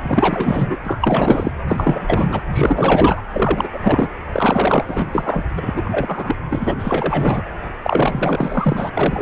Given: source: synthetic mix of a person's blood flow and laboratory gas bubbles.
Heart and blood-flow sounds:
Doppler ultrasound of blood flow; precordium
0.02-0.76 s: bubbles
0.85-1.51 s: bubbles
1.68-2.42 s: bubbles
2.53-3.23 s: bubbles
3.33-3.68 s: bubbles
3.73-3.79 s: bubbles
3.82-4.12 s: bubbles
4.32-5.45 s: bubbles
5.57-6.36 s: bubbles
6.50-6.75 s: bubbles
6.79-7.42 s: bubbles
7.83-8.90 s: bubbles
8.94-9.22 s: bubbles
From the record:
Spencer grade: 4 (maximum detectable bubble signal sounding continuously throughout systole and diastole of every cardiac period, and overriding the amplitude of the normal cardiac signals); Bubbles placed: anywhere in the cardiac cycle

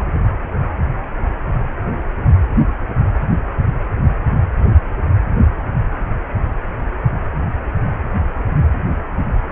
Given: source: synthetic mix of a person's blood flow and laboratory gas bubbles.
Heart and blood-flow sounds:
Doppler ultrasound of blood flow; precordium
0.00-0.04 s: bubbles
From the record:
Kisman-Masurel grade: 212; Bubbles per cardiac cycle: several, 3 to 8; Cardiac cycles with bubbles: 1 to 10%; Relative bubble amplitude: moderate (0.250 to 0.450); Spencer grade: 1 (occasional bubble signal discernible with the cardiac motion signal, with majority of cardiac periods free of bubbles); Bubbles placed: anywhere in the cardiac cycle

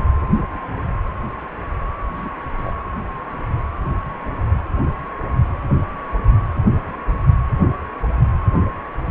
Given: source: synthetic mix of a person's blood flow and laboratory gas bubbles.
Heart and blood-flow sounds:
Doppler ultrasound of blood flow; precordium
2.15-2.30 s: bubbles
2.58-2.73 s: bubbles
From the record:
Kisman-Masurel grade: 121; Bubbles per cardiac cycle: 1 to 2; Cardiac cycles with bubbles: 10 to 50%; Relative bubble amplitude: barely perceptible (0.100 to 0.250); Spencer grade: 2 (many but less than half of the cardiac periods contain bubble signals, singularly or in groups); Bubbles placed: anywhere in the cardiac cycle

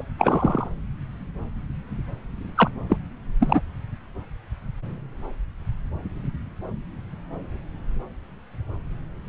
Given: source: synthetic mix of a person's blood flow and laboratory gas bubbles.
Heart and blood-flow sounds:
Doppler ultrasound of blood flow; subclavian vein
0.00-0.03 s: bubbles
0.18-0.68 s: bubbles
2.56-2.71 s: bubbles
2.89-2.97 s: bubbles
3.40-3.61 s: bubbles
From the record:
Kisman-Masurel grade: 222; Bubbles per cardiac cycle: several, 3 to 8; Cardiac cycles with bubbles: 10 to 50%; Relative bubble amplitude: moderate (0.250 to 0.450); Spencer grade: 2 (many but less than half of the cardiac periods contain bubble signals, singularly or in groups); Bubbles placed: anywhere in the cardiac cycle

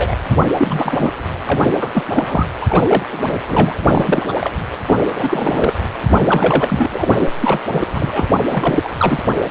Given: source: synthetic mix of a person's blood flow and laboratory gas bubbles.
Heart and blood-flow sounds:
Doppler ultrasound of blood flow; precordium
0.00-0.16 s: bubbles
0.30-0.40 s: bubbles
0.48-1.12 s: bubbles
1.49-1.71 s: bubbles
1.80-1.89 s: bubbles
1.92-2.04 s: bubbles
2.15-2.25 s: bubbles
2.27-2.47 s: bubbles
2.60-3.06 s: bubbles
3.12-3.37 s: bubbles
3.47-3.74 s: bubbles
3.87-4.34 s: bubbles
4.37-4.51 s: bubbles
4.87-5.00 s: bubbles
5.16-5.78 s: bubbles
6.08-7.29 s: bubbles
7.41-7.59 s: bubbles
7.72-7.86 s: bubbles
7.91-8.28 s: bubbles
8.50-8.89 s: bubbles
8.98-9.21 s: bubbles
From the record:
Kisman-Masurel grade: 343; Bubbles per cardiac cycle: rolling drumbeat, 9 or more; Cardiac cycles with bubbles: 100%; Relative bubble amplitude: loud (0.450 to 0.775); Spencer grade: 3 (all of the cardiac periods contain showers or single bubble signals, but not dominating or overriding the cardiac motion signals); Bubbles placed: anywhere in the cardiac cycle

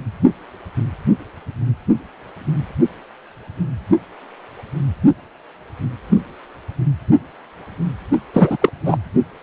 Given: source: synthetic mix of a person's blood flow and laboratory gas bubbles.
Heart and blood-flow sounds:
Doppler ultrasound of blood flow; precordium
8.34-8.57 s: bubbles
8.61-8.71 s: bubbles
8.85-8.98 s: bubbles
From the record:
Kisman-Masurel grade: 213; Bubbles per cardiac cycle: several, 3 to 8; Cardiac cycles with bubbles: 1 to 10%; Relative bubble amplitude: loud (0.450 to 0.775); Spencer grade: 1 (occasional bubble signal discernible with the cardiac motion signal, with majority of cardiac periods free of bubbles); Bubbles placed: only in the low amplitude regions of the cardiac cycle

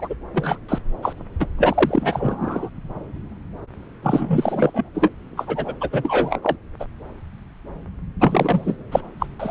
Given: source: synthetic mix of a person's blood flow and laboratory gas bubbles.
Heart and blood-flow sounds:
Doppler ultrasound of blood flow; subclavian vein
0.00-0.15 s: bubbles
0.34-0.58 s: bubbles
0.69-0.78 s: bubbles
1.02-1.13 s: bubbles
1.40-1.47 s: bubbles
1.57-2.69 s: bubbles
4.02-4.89 s: bubbles
4.94-5.10 s: bubbles
5.37-5.73 s: bubbles
5.80-5.88 s: bubbles
5.91-6.56 s: bubbles
6.79-6.85 s: bubbles
8.20-8.77 s: bubbles
8.91-9.01 s: bubbles
9.20-9.26 s: bubbles
9.40-9.51 s: bubbles
From the record:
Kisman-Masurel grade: 332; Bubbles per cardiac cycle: rolling drumbeat, 9 or more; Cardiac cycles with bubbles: 50 to 99%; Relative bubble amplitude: moderate (0.250 to 0.450); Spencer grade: 3 (all of the cardiac periods contain showers or single bubble signals, but not dominating or overriding the cardiac motion signals); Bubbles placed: anywhere in the cardiac cycle

